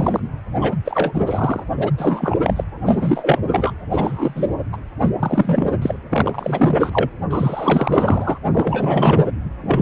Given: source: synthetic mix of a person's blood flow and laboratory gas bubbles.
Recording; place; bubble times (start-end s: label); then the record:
Doppler ultrasound of blood flow; precordium
0.00-0.20 s: bubbles
0.59-0.77 s: bubbles
0.84-1.64 s: bubbles
1.76-1.92 s: bubbles
1.97-2.35 s: bubbles
2.43-2.64 s: bubbles
2.85-3.39 s: bubbles
3.51-3.73 s: bubbles
3.91-4.50 s: bubbles
4.72-4.77 s: bubbles
5.00-5.09 s: bubbles
5.19-5.71 s: bubbles
5.81-5.98 s: bubbles
6.12-7.10 s: bubbles
7.30-8.38 s: bubbles
8.54-9.27 s: bubbles
9.63-9.82 s: bubbles
From the record:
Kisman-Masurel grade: 343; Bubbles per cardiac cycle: rolling drumbeat, 9 or more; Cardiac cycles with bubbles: 100%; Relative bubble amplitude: loud (0.450 to 0.775); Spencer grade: 3 (all of the cardiac periods contain showers or single bubble signals, but not dominating or overriding the cardiac motion signals); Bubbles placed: anywhere in the cardiac cycle